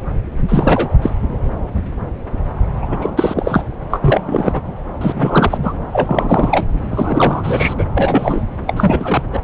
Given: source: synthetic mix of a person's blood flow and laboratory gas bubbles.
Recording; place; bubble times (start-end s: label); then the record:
Doppler ultrasound of blood flow; subclavian vein
0.49-0.89 s: bubbles
1.01-1.10 s: bubbles
2.81-3.65 s: bubbles
3.90-4.60 s: bubbles
5.01-5.58 s: bubbles
5.61-5.73 s: bubbles
5.92-6.66 s: bubbles
6.90-7.74 s: bubbles
7.78-7.84 s: bubbles
7.95-8.43 s: bubbles
8.67-9.23 s: bubbles
9.32-9.41 s: bubbles
From the record:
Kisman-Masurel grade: 333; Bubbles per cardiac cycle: rolling drumbeat, 9 or more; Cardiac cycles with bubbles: 50 to 99%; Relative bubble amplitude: loud (0.450 to 0.775); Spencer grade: 3 (all of the cardiac periods contain showers or single bubble signals, but not dominating or overriding the cardiac motion signals); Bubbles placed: anywhere in the cardiac cycle